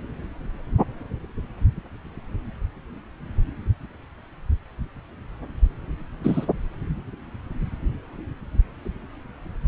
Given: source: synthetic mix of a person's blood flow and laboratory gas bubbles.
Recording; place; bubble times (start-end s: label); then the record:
Doppler ultrasound of blood flow; subclavian vein
6.23-6.46 s: bubbles
From the record:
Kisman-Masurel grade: 113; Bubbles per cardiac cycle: 1 to 2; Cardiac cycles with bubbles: 1 to 10%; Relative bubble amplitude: loud (0.450 to 0.775); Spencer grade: 1 (occasional bubble signal discernible with the cardiac motion signal, with majority of cardiac periods free of bubbles); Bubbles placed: anywhere in the cardiac cycle